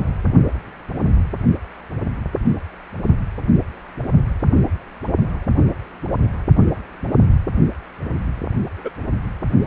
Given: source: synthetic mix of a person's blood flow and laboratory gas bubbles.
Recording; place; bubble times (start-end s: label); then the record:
Doppler ultrasound of blood flow; precordium
0.00-0.04 s: bubbles
8.78-8.91 s: bubbles
From the record:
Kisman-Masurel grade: 123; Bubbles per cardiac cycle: 1 to 2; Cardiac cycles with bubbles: 10 to 50%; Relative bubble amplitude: loud (0.450 to 0.775); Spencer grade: 2 (many but less than half of the cardiac periods contain bubble signals, singularly or in groups); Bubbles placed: only in the low amplitude regions of the cardiac cycle